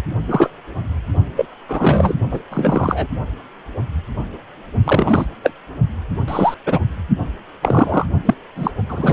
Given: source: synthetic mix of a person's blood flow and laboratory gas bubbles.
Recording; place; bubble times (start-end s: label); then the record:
Doppler ultrasound of blood flow; precordium
0.27-0.50 s: bubbles
1.36-1.46 s: bubbles
1.68-2.15 s: bubbles
2.30-2.40 s: bubbles
2.50-3.07 s: bubbles
4.84-5.25 s: bubbles
5.43-5.52 s: bubbles
6.27-6.54 s: bubbles
6.66-6.80 s: bubbles
7.62-8.06 s: bubbles
8.25-8.34 s: bubbles
8.56-8.71 s: bubbles
8.89-9.13 s: bubbles
From the record:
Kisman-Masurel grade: 233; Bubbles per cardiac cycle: several, 3 to 8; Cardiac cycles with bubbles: 50 to 99%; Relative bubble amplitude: loud (0.450 to 0.775); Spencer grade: 3 (all of the cardiac periods contain showers or single bubble signals, but not dominating or overriding the cardiac motion signals); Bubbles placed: only in the low amplitude regions of the cardiac cycle